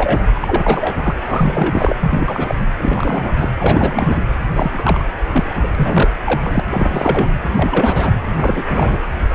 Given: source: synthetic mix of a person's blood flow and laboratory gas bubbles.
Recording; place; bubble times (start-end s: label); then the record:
Doppler ultrasound of blood flow; precordium
0.00-0.27 s: bubbles
0.34-1.16 s: bubbles
1.25-1.95 s: bubbles
1.99-2.55 s: bubbles
2.77-3.50 s: bubbles
3.58-4.23 s: bubbles
4.55-5.05 s: bubbles
5.31-5.52 s: bubbles
5.62-5.69 s: bubbles
5.75-6.11 s: bubbles
6.24-6.60 s: bubbles
6.71-7.27 s: bubbles
7.50-8.11 s: bubbles
8.33-8.63 s: bubbles
8.69-8.97 s: bubbles
9.29-9.35 s: bubbles
From the record:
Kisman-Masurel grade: 343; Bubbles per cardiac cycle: rolling drumbeat, 9 or more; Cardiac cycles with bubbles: 100%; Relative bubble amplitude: loud (0.450 to 0.775); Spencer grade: 3 (all of the cardiac periods contain showers or single bubble signals, but not dominating or overriding the cardiac motion signals); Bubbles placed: anywhere in the cardiac cycle